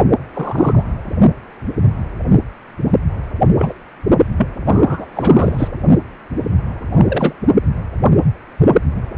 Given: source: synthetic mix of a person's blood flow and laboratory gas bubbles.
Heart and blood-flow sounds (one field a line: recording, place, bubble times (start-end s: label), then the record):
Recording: Doppler ultrasound of blood flow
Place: precordium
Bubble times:
0.34-0.83 s: bubbles
3.58-3.74 s: bubbles
4.37-4.47 s: bubbles
4.67-5.06 s: bubbles
5.13-5.68 s: bubbles
6.93-7.33 s: bubbles
From the record:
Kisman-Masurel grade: 223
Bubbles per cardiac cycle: several, 3 to 8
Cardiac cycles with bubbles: 10 to 50%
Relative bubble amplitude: loud (0.450 to 0.775)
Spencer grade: 2 (many but less than half of the cardiac periods contain bubble signals, singularly or in groups)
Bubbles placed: anywhere in the cardiac cycle